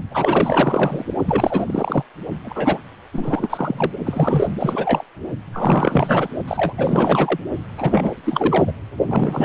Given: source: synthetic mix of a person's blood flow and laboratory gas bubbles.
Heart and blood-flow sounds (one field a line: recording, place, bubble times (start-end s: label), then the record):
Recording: Doppler ultrasound of blood flow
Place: precordium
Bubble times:
0.11-1.05 s: bubbles
1.26-2.02 s: bubbles
2.44-2.79 s: bubbles
3.12-3.91 s: bubbles
4.06-4.48 s: bubbles
4.60-5.04 s: bubbles
5.53-6.28 s: bubbles
6.48-6.74 s: bubbles
6.77-7.40 s: bubbles
7.78-8.12 s: bubbles
8.23-8.72 s: bubbles
9.06-9.45 s: bubbles
From the record:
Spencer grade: 4 (maximum detectable bubble signal sounding continuously throughout systole and diastole of every cardiac period, and overriding the amplitude of the normal cardiac signals)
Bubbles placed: only in the low amplitude regions of the cardiac cycle